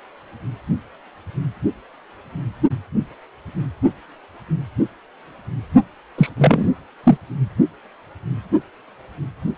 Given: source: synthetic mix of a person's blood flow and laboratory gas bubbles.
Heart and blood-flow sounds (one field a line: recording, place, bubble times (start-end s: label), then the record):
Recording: Doppler ultrasound of blood flow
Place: precordium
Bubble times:
6.17-6.30 s: bubbles
6.37-6.69 s: bubbles
7.04-7.17 s: bubbles
From the record:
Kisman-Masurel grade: 213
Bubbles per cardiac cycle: several, 3 to 8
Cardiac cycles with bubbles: 1 to 10%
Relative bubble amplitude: loud (0.450 to 0.775)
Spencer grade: 1 (occasional bubble signal discernible with the cardiac motion signal, with majority of cardiac periods free of bubbles)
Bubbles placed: only in the low amplitude regions of the cardiac cycle